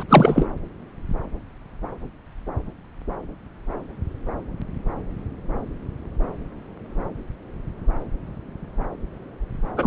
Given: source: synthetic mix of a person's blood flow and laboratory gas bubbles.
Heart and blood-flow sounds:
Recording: Doppler ultrasound of blood flow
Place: subclavian vein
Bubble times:
0.00-0.03 s: bubbles
0.09-0.46 s: bubbles
9.77-9.87 s: bubbles
From the record:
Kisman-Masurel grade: 213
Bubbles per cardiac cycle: several, 3 to 8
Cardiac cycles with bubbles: 1 to 10%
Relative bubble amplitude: loud (0.450 to 0.775)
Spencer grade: 1 (occasional bubble signal discernible with the cardiac motion signal, with majority of cardiac periods free of bubbles)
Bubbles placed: anywhere in the cardiac cycle

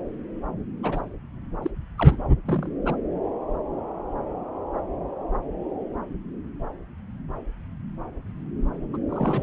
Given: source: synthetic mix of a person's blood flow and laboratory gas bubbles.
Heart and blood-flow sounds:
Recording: Doppler ultrasound of blood flow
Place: subclavian vein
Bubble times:
0.83-1.00 s: bubbles
1.62-1.71 s: bubbles
1.98-2.21 s: bubbles
2.46-2.70 s: bubbles
2.85-2.96 s: bubbles
8.93-8.97 s: bubbles
9.09-9.43 s: bubbles
From the record:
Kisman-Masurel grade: 221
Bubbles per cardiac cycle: several, 3 to 8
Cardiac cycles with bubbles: 10 to 50%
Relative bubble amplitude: barely perceptible (0.100 to 0.250)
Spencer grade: 2 (many but less than half of the cardiac periods contain bubble signals, singularly or in groups)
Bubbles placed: anywhere in the cardiac cycle

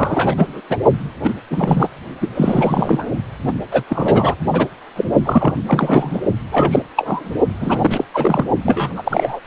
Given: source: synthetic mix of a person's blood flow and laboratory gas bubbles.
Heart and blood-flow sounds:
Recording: Doppler ultrasound of blood flow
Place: precordium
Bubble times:
0.00-0.61 s: bubbles
0.69-0.79 s: bubbles
1.23-1.34 s: bubbles
1.50-1.88 s: bubbles
2.20-2.29 s: bubbles
2.35-3.09 s: bubbles
3.47-3.52 s: bubbles
3.71-3.84 s: bubbles
3.90-4.35 s: bubbles
4.52-4.67 s: bubbles
4.96-5.04 s: bubbles
5.25-5.54 s: bubbles
5.67-6.21 s: bubbles
6.51-6.81 s: bubbles
6.96-7.34 s: bubbles
7.60-8.04 s: bubbles
8.13-8.45 s: bubbles
8.64-9.41 s: bubbles
9.45-9.47 s: bubbles
From the record:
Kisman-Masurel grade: 343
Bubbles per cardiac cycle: rolling drumbeat, 9 or more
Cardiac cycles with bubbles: 100%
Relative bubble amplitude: loud (0.450 to 0.775)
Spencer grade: 3 (all of the cardiac periods contain showers or single bubble signals, but not dominating or overriding the cardiac motion signals)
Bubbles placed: only in the low amplitude regions of the cardiac cycle

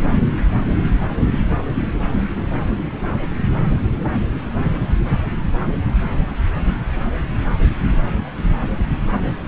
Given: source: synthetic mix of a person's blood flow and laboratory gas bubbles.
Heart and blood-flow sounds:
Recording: Doppler ultrasound of blood flow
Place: subclavian vein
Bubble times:
no bubbles
From the record:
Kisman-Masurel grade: 000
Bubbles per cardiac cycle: 0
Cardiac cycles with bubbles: 0%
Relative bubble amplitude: no bubbles discernible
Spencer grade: 0 (complete lack of bubble signals)

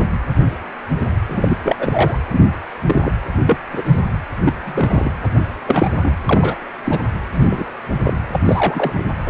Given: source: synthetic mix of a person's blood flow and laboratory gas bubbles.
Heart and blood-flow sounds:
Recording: Doppler ultrasound of blood flow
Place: precordium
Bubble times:
1.28-1.76 s: bubbles
1.78-2.18 s: bubbles
2.30-2.50 s: bubbles
2.86-3.11 s: bubbles
3.46-3.59 s: bubbles
3.72-3.99 s: bubbles
4.45-4.53 s: bubbles
4.61-5.10 s: bubbles
5.23-5.29 s: bubbles
5.66-5.90 s: bubbles
6.02-6.13 s: bubbles
6.29-6.56 s: bubbles
6.84-7.00 s: bubbles
7.33-7.67 s: bubbles
8.03-8.21 s: bubbles
8.28-8.39 s: bubbles
8.46-9.04 s: bubbles
9.26-9.30 s: bubbles
From the record:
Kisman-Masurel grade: 232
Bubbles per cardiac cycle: several, 3 to 8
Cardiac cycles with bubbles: 50 to 99%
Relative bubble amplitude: moderate (0.250 to 0.450)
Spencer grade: 3 (all of the cardiac periods contain showers or single bubble signals, but not dominating or overriding the cardiac motion signals)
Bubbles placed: anywhere in the cardiac cycle

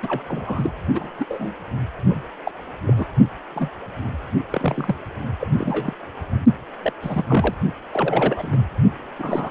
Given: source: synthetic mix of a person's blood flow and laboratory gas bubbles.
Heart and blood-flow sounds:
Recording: Doppler ultrasound of blood flow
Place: precordium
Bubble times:
0.03-0.22 s: bubbles
0.28-0.71 s: bubbles
0.94-1.10 s: bubbles
1.19-1.26 s: bubbles
1.29-1.53 s: bubbles
2.09-2.21 s: bubbles
2.43-2.51 s: bubbles
2.87-2.93 s: bubbles
2.96-3.06 s: bubbles
3.56-3.70 s: bubbles
4.50-4.96 s: bubbles
5.40-5.48 s: bubbles
5.58-5.93 s: bubbles
6.83-6.93 s: bubbles
7.03-7.25 s: bubbles
7.28-7.54 s: bubbles
7.92-8.65 s: bubbles
9.18-9.50 s: bubbles
From the record:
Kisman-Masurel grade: 242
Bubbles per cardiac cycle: several, 3 to 8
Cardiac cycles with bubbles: 100%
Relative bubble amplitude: moderate (0.250 to 0.450)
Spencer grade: 3 (all of the cardiac periods contain showers or single bubble signals, but not dominating or overriding the cardiac motion signals)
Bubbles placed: only in the low amplitude regions of the cardiac cycle

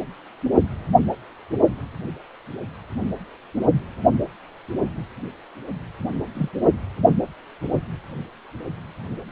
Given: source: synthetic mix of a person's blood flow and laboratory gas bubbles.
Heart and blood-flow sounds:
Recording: Doppler ultrasound of blood flow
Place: precordium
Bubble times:
6.34-6.49 s: bubbles
From the record:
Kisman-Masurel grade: 111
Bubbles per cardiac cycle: 1 to 2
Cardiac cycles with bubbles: 1 to 10%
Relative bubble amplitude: barely perceptible (0.100 to 0.250)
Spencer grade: 1 (occasional bubble signal discernible with the cardiac motion signal, with majority of cardiac periods free of bubbles)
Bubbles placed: only in the low amplitude regions of the cardiac cycle

